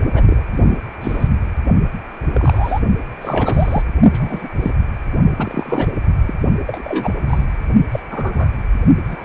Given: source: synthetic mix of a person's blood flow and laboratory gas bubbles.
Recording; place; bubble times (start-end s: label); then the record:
Doppler ultrasound of blood flow; precordium
0.14-0.43 s: bubbles
0.52-0.79 s: bubbles
1.00-1.29 s: bubbles
2.32-2.80 s: bubbles
3.21-3.82 s: bubbles
4.12-4.49 s: bubbles
4.58-4.71 s: bubbles
5.36-5.92 s: bubbles
6.25-6.34 s: bubbles
6.67-7.14 s: bubbles
7.27-7.46 s: bubbles
7.91-7.99 s: bubbles
8.11-8.54 s: bubbles
9.04-9.25 s: bubbles
From the record:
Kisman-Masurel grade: 242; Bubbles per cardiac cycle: several, 3 to 8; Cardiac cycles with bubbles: 100%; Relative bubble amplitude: moderate (0.250 to 0.450); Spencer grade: 3 (all of the cardiac periods contain showers or single bubble signals, but not dominating or overriding the cardiac motion signals); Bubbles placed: only in the low amplitude regions of the cardiac cycle